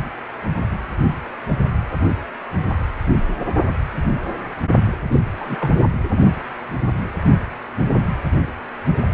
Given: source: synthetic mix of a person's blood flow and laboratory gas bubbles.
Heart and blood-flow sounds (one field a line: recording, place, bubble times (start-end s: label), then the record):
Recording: Doppler ultrasound of blood flow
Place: precordium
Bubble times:
5.12-5.20 s: bubbles
5.40-5.56 s: bubbles
5.60-5.70 s: bubbles
From the record:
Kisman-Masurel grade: 212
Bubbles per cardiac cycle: several, 3 to 8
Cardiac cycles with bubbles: 1 to 10%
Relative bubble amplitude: moderate (0.250 to 0.450)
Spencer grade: 1 (occasional bubble signal discernible with the cardiac motion signal, with majority of cardiac periods free of bubbles)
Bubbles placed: anywhere in the cardiac cycle